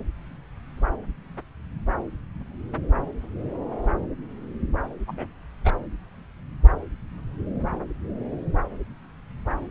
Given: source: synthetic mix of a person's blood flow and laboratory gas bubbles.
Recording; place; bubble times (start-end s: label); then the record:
Doppler ultrasound of blood flow; subclavian vein
5.07-5.27 s: bubbles
5.64-5.73 s: bubbles
From the record:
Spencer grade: 1 (occasional bubble signal discernible with the cardiac motion signal, with majority of cardiac periods free of bubbles); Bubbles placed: anywhere in the cardiac cycle